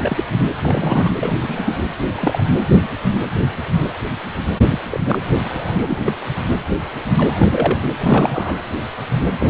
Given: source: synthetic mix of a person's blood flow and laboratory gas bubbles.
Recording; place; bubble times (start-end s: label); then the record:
Doppler ultrasound of blood flow; precordium
0.02-0.24 s: bubbles
0.62-1.11 s: bubbles
1.19-1.83 s: bubbles
2.15-2.44 s: bubbles
4.71-4.79 s: bubbles
4.91-5.00 s: bubbles
5.05-5.18 s: bubbles
5.44-5.50 s: bubbles
5.53-5.97 s: bubbles
6.04-6.12 s: bubbles
7.17-7.79 s: bubbles
7.98-8.55 s: bubbles
9.39-9.47 s: bubbles
From the record:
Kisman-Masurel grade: 232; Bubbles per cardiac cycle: several, 3 to 8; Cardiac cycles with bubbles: 50 to 99%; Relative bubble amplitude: moderate (0.250 to 0.450); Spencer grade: 3 (all of the cardiac periods contain showers or single bubble signals, but not dominating or overriding the cardiac motion signals); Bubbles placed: anywhere in the cardiac cycle